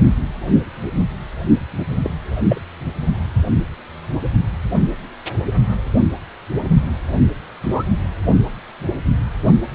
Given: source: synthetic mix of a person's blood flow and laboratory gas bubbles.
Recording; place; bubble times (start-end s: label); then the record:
Doppler ultrasound of blood flow; precordium
2.03-2.10 s: bubbles
2.49-2.61 s: bubbles
7.62-7.83 s: bubbles
From the record:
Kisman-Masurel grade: 122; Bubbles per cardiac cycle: 1 to 2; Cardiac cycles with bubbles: 10 to 50%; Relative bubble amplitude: moderate (0.250 to 0.450); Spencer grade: 2 (many but less than half of the cardiac periods contain bubble signals, singularly or in groups); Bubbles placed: only in the low amplitude regions of the cardiac cycle